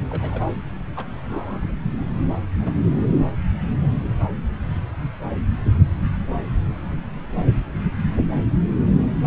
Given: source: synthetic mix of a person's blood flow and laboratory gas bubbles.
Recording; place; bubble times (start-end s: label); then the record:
Doppler ultrasound of blood flow; subclavian vein
0.10-0.41 s: bubbles
0.96-1.05 s: bubbles
1.29-1.74 s: bubbles
2.60-2.82 s: bubbles
From the record:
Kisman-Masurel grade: 121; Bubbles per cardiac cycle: 1 to 2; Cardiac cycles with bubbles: 10 to 50%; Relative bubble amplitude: barely perceptible (0.100 to 0.250); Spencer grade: 2 (many but less than half of the cardiac periods contain bubble signals, singularly or in groups); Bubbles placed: anywhere in the cardiac cycle